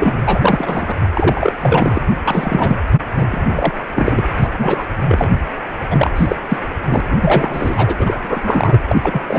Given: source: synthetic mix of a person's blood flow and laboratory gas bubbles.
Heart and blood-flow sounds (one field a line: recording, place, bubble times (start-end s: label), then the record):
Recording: Doppler ultrasound of blood flow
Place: precordium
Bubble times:
0.00-0.22 s: bubbles
0.28-0.99 s: bubbles
1.13-1.52 s: bubbles
1.60-2.01 s: bubbles
2.25-2.77 s: bubbles
3.17-3.26 s: bubbles
3.30-3.72 s: bubbles
3.94-4.24 s: bubbles
4.36-4.48 s: bubbles
4.58-4.86 s: bubbles
5.08-5.31 s: bubbles
5.91-6.11 s: bubbles
6.16-6.36 s: bubbles
6.48-6.57 s: bubbles
6.89-7.00 s: bubbles
7.07-7.18 s: bubbles
7.21-8.79 s: bubbles
8.88-9.21 s: bubbles
9.28-9.39 s: bubbles
From the record:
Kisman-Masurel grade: 343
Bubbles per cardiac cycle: rolling drumbeat, 9 or more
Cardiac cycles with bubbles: 100%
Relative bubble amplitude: loud (0.450 to 0.775)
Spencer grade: 3 (all of the cardiac periods contain showers or single bubble signals, but not dominating or overriding the cardiac motion signals)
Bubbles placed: anywhere in the cardiac cycle